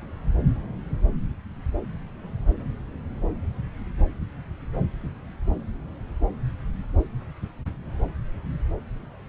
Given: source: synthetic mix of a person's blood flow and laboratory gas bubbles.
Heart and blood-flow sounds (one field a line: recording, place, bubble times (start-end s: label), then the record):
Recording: Doppler ultrasound of blood flow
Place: subclavian vein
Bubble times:
no bubbles
From the record:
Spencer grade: 0 (complete lack of bubble signals)